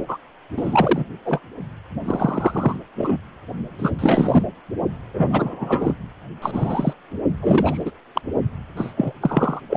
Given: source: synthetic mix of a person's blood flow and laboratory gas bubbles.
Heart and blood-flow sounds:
Doppler ultrasound of blood flow; precordium
0.08-0.17 s: bubbles
0.57-1.06 s: bubbles
1.25-1.40 s: bubbles
2.04-2.78 s: bubbles
2.96-3.18 s: bubbles
3.79-3.91 s: bubbles
3.98-4.43 s: bubbles
5.13-5.94 s: bubbles
6.42-6.93 s: bubbles
7.41-7.92 s: bubbles
8.15-8.21 s: bubbles
8.76-8.93 s: bubbles
8.96-9.12 s: bubbles
9.21-9.62 s: bubbles
9.69-9.77 s: bubbles
From the record:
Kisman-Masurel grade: 233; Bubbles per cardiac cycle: several, 3 to 8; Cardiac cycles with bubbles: 50 to 99%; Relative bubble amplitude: loud (0.450 to 0.775); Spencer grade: 3 (all of the cardiac periods contain showers or single bubble signals, but not dominating or overriding the cardiac motion signals); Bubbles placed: only in the low amplitude regions of the cardiac cycle

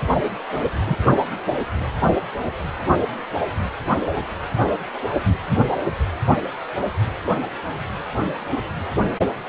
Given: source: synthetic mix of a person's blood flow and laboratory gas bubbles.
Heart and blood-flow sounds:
Doppler ultrasound of blood flow; precordium
0.84-0.97 s: bubbles
From the record:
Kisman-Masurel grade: 112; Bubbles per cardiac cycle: 1 to 2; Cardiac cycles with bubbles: 1 to 10%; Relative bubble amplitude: moderate (0.250 to 0.450); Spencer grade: 1 (occasional bubble signal discernible with the cardiac motion signal, with majority of cardiac periods free of bubbles); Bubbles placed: anywhere in the cardiac cycle

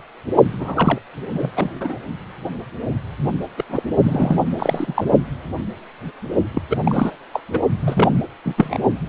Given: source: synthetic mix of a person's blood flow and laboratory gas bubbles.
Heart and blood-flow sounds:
Doppler ultrasound of blood flow; precordium
0.59-0.99 s: bubbles
1.33-1.50 s: bubbles
1.55-1.70 s: bubbles
1.80-1.99 s: bubbles
3.58-3.64 s: bubbles
3.69-3.83 s: bubbles
4.04-4.44 s: bubbles
4.57-5.04 s: bubbles
6.54-6.62 s: bubbles
6.69-6.78 s: bubbles
6.83-7.15 s: bubbles
7.33-7.40 s: bubbles
7.53-7.60 s: bubbles
7.80-8.21 s: bubbles
8.45-8.54 s: bubbles
8.57-8.78 s: bubbles
From the record:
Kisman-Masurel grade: 332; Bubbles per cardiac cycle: rolling drumbeat, 9 or more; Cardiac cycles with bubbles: 50 to 99%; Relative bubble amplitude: moderate (0.250 to 0.450); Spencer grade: 3 (all of the cardiac periods contain showers or single bubble signals, but not dominating or overriding the cardiac motion signals); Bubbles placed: only in the low amplitude regions of the cardiac cycle

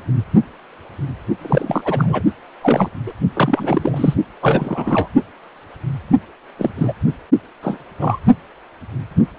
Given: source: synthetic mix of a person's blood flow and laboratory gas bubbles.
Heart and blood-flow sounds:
Doppler ultrasound of blood flow; precordium
1.41-2.22 s: bubbles
2.62-2.90 s: bubbles
3.06-3.13 s: bubbles
3.33-4.14 s: bubbles
4.42-5.08 s: bubbles
6.58-6.71 s: bubbles
6.78-6.93 s: bubbles
7.62-7.78 s: bubbles
8.00-8.19 s: bubbles
From the record:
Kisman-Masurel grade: 232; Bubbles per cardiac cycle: several, 3 to 8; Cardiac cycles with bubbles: 50 to 99%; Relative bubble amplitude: moderate (0.250 to 0.450); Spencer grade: 3 (all of the cardiac periods contain showers or single bubble signals, but not dominating or overriding the cardiac motion signals); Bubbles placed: only in the low amplitude regions of the cardiac cycle

